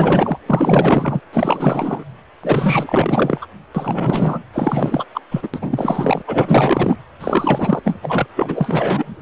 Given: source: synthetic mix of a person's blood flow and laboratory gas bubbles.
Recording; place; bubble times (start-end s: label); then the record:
Doppler ultrasound of blood flow; precordium
0.00-0.39 s: bubbles
0.46-1.21 s: bubbles
1.33-2.04 s: bubbles
2.43-3.39 s: bubbles
3.41-3.47 s: bubbles
3.74-4.39 s: bubbles
4.53-5.05 s: bubbles
5.13-5.21 s: bubbles
5.30-5.48 s: bubbles
5.53-6.22 s: bubbles
6.27-6.96 s: bubbles
7.19-7.81 s: bubbles
7.84-7.96 s: bubbles
8.02-8.26 s: bubbles
8.36-9.22 s: bubbles
From the record:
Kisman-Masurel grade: 444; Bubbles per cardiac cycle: continuous sound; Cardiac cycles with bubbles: 100%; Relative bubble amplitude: maximal (0.775 to 0.999); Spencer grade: 4 (maximum detectable bubble signal sounding continuously throughout systole and diastole of every cardiac period, and overriding the amplitude of the normal cardiac signals); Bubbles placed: anywhere in the cardiac cycle